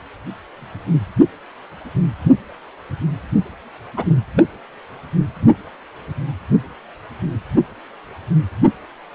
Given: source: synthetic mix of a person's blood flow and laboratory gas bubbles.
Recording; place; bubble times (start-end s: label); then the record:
Doppler ultrasound of blood flow; precordium
3.97-4.04 s: bubbles
4.36-4.45 s: bubbles
From the record:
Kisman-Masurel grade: 122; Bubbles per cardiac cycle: 1 to 2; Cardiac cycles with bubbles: 10 to 50%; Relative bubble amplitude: moderate (0.250 to 0.450); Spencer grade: 2 (many but less than half of the cardiac periods contain bubble signals, singularly or in groups); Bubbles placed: anywhere in the cardiac cycle